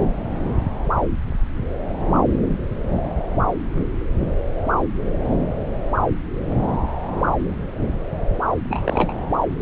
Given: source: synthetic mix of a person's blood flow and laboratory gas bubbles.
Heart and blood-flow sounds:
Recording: Doppler ultrasound of blood flow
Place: subclavian vein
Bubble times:
8.69-9.15 s: bubbles
From the record:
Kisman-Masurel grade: 212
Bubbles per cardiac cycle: several, 3 to 8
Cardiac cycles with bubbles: 1 to 10%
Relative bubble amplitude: moderate (0.250 to 0.450)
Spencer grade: 1 (occasional bubble signal discernible with the cardiac motion signal, with majority of cardiac periods free of bubbles)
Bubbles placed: anywhere in the cardiac cycle

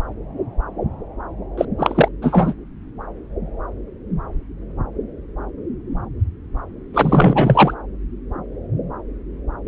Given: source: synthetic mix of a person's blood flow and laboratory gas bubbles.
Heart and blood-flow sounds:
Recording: Doppler ultrasound of blood flow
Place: subclavian vein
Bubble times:
1.58-1.65 s: bubbles
1.79-2.08 s: bubbles
2.22-2.54 s: bubbles
6.93-7.74 s: bubbles
From the record:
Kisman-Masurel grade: 223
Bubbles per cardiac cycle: several, 3 to 8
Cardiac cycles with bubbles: 10 to 50%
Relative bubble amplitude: loud (0.450 to 0.775)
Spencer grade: 2 (many but less than half of the cardiac periods contain bubble signals, singularly or in groups)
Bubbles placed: anywhere in the cardiac cycle

